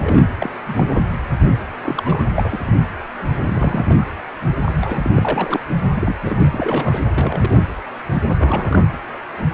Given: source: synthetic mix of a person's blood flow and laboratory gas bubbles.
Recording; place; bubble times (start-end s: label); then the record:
Doppler ultrasound of blood flow; precordium
0.00-0.31 s: bubbles
0.39-0.50 s: bubbles
0.67-0.88 s: bubbles
1.80-2.25 s: bubbles
2.35-2.72 s: bubbles
3.43-4.05 s: bubbles
4.65-5.60 s: bubbles
5.95-6.15 s: bubbles
6.22-6.49 s: bubbles
6.52-7.02 s: bubbles
7.09-7.62 s: bubbles
8.13-8.22 s: bubbles
8.29-8.34 s: bubbles
8.37-8.88 s: bubbles
From the record:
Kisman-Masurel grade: 232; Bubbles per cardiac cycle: several, 3 to 8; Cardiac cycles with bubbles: 50 to 99%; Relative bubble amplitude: moderate (0.250 to 0.450); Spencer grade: 3 (all of the cardiac periods contain showers or single bubble signals, but not dominating or overriding the cardiac motion signals); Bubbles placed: anywhere in the cardiac cycle